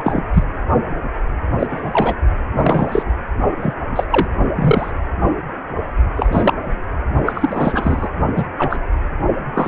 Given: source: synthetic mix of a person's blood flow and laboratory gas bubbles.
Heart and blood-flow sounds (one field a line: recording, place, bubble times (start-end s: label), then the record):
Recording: Doppler ultrasound of blood flow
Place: precordium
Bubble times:
0.00-0.22 s: bubbles
0.33-0.43 s: bubbles
1.59-2.15 s: bubbles
2.55-3.03 s: bubbles
3.60-3.74 s: bubbles
3.95-4.04 s: bubbles
4.10-4.28 s: bubbles
4.56-4.91 s: bubbles
6.16-6.54 s: bubbles
7.26-8.09 s: bubbles
8.36-8.46 s: bubbles
8.58-8.79 s: bubbles
9.54-9.68 s: bubbles
From the record:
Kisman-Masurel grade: 233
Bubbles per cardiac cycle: several, 3 to 8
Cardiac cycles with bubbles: 50 to 99%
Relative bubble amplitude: loud (0.450 to 0.775)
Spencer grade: 3 (all of the cardiac periods contain showers or single bubble signals, but not dominating or overriding the cardiac motion signals)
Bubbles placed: only in the low amplitude regions of the cardiac cycle